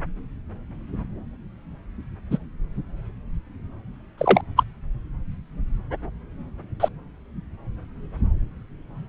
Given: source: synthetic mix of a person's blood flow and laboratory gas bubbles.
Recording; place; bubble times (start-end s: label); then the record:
Doppler ultrasound of blood flow; subclavian vein
2.30-2.38 s: bubbles
4.17-4.41 s: bubbles
4.57-4.63 s: bubbles
6.79-6.88 s: bubbles
From the record:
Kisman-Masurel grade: 123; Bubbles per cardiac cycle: 1 to 2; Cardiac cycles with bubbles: 10 to 50%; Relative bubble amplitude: loud (0.450 to 0.775); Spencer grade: 2 (many but less than half of the cardiac periods contain bubble signals, singularly or in groups); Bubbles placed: anywhere in the cardiac cycle